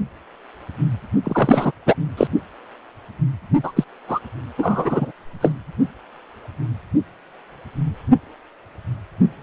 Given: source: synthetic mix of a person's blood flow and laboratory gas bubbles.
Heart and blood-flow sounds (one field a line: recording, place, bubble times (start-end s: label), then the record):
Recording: Doppler ultrasound of blood flow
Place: precordium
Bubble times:
1.23-1.72 s: bubbles
1.86-1.95 s: bubbles
2.17-2.27 s: bubbles
3.63-3.72 s: bubbles
3.76-3.84 s: bubbles
4.08-4.19 s: bubbles
4.57-5.11 s: bubbles
5.41-5.52 s: bubbles
From the record:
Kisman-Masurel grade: 223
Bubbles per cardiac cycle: several, 3 to 8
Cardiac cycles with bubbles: 10 to 50%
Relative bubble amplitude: loud (0.450 to 0.775)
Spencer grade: 2 (many but less than half of the cardiac periods contain bubble signals, singularly or in groups)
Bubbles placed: only in the low amplitude regions of the cardiac cycle